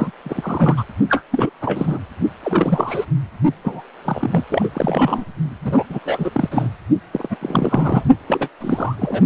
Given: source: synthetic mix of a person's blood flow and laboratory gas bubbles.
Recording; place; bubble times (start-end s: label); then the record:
Doppler ultrasound of blood flow; precordium
0.00-0.11 s: bubbles
0.24-0.83 s: bubbles
1.09-1.22 s: bubbles
1.31-1.50 s: bubbles
1.61-1.99 s: bubbles
2.43-3.06 s: bubbles
3.64-3.82 s: bubbles
4.04-4.43 s: bubbles
4.49-5.24 s: bubbles
5.64-5.83 s: bubbles
5.89-5.99 s: bubbles
6.01-6.30 s: bubbles
6.32-6.69 s: bubbles
7.12-7.36 s: bubbles
7.41-8.04 s: bubbles
8.27-8.49 s: bubbles
8.61-9.22 s: bubbles
From the record:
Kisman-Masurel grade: 342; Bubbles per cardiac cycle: rolling drumbeat, 9 or more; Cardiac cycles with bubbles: 100%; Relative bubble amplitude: moderate (0.250 to 0.450); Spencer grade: 3 (all of the cardiac periods contain showers or single bubble signals, but not dominating or overriding the cardiac motion signals); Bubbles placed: only in the low amplitude regions of the cardiac cycle